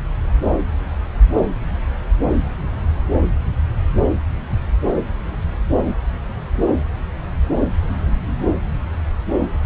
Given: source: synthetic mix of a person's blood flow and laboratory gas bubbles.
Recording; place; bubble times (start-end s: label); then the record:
Doppler ultrasound of blood flow; subclavian vein
4.94-5.02 s: bubbles
From the record:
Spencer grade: 1 (occasional bubble signal discernible with the cardiac motion signal, with majority of cardiac periods free of bubbles); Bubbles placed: anywhere in the cardiac cycle